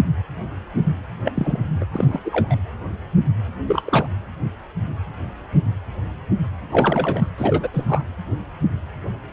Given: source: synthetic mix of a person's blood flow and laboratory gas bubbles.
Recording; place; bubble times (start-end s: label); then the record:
Doppler ultrasound of blood flow; precordium
1.25-1.31 s: bubbles
1.35-1.60 s: bubbles
1.80-1.85 s: bubbles
1.93-2.19 s: bubbles
2.25-2.56 s: bubbles
3.67-3.82 s: bubbles
3.85-4.07 s: bubbles
6.70-7.29 s: bubbles
7.38-7.68 s: bubbles
7.74-8.05 s: bubbles
From the record:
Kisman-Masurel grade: 222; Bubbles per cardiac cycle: several, 3 to 8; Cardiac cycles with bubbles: 10 to 50%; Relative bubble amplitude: moderate (0.250 to 0.450); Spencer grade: 2 (many but less than half of the cardiac periods contain bubble signals, singularly or in groups); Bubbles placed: anywhere in the cardiac cycle